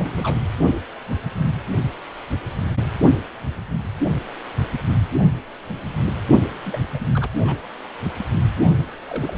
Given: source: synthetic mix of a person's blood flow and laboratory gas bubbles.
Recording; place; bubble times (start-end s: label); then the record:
Doppler ultrasound of blood flow; precordium
0.00-0.38 s: bubbles
6.65-6.79 s: bubbles
6.90-7.07 s: bubbles
7.13-7.29 s: bubbles
7.37-7.67 s: bubbles
9.09-9.38 s: bubbles
From the record:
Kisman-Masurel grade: 221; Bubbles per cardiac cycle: several, 3 to 8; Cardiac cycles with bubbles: 10 to 50%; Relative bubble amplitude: barely perceptible (0.100 to 0.250); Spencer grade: 2 (many but less than half of the cardiac periods contain bubble signals, singularly or in groups); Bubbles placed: only in the low amplitude regions of the cardiac cycle